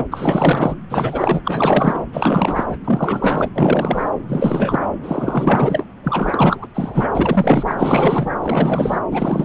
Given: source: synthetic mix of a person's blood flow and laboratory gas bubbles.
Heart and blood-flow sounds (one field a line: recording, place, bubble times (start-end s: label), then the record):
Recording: Doppler ultrasound of blood flow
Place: subclavian vein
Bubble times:
0.00-0.07 s: bubbles
0.11-0.75 s: bubbles
0.90-1.42 s: bubbles
1.44-2.04 s: bubbles
2.12-2.76 s: bubbles
2.84-3.51 s: bubbles
3.54-4.11 s: bubbles
4.27-4.89 s: bubbles
5.03-5.85 s: bubbles
6.04-6.68 s: bubbles
6.74-7.64 s: bubbles
7.67-7.75 s: bubbles
7.77-8.31 s: bubbles
8.40-8.99 s: bubbles
9.10-9.45 s: bubbles
From the record:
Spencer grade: 4 (maximum detectable bubble signal sounding continuously throughout systole and diastole of every cardiac period, and overriding the amplitude of the normal cardiac signals)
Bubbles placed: anywhere in the cardiac cycle